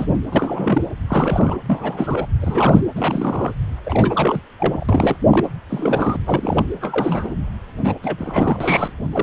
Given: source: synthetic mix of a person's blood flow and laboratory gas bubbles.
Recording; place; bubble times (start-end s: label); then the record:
Doppler ultrasound of blood flow; precordium
0.00-0.20 s: bubbles
0.32-0.82 s: bubbles
1.08-1.57 s: bubbles
1.66-2.26 s: bubbles
2.41-2.81 s: bubbles
2.95-3.53 s: bubbles
3.86-4.41 s: bubbles
4.58-4.84 s: bubbles
4.88-5.17 s: bubbles
5.30-5.50 s: bubbles
5.70-6.17 s: bubbles
6.26-6.65 s: bubbles
6.81-7.34 s: bubbles
7.84-7.97 s: bubbles
8.03-8.90 s: bubbles
9.12-9.23 s: bubbles
From the record:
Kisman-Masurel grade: 342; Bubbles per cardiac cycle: rolling drumbeat, 9 or more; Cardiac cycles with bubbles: 100%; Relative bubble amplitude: moderate (0.250 to 0.450); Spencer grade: 3 (all of the cardiac periods contain showers or single bubble signals, but not dominating or overriding the cardiac motion signals); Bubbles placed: anywhere in the cardiac cycle